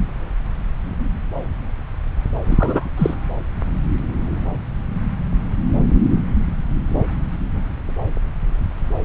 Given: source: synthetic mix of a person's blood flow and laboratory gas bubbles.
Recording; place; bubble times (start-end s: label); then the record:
Doppler ultrasound of blood flow; subclavian vein
2.44-2.90 s: bubbles
2.98-3.15 s: bubbles
From the record:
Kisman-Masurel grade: 213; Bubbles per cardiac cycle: several, 3 to 8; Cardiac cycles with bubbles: 1 to 10%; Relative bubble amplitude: loud (0.450 to 0.775); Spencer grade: 1 (occasional bubble signal discernible with the cardiac motion signal, with majority of cardiac periods free of bubbles); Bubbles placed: anywhere in the cardiac cycle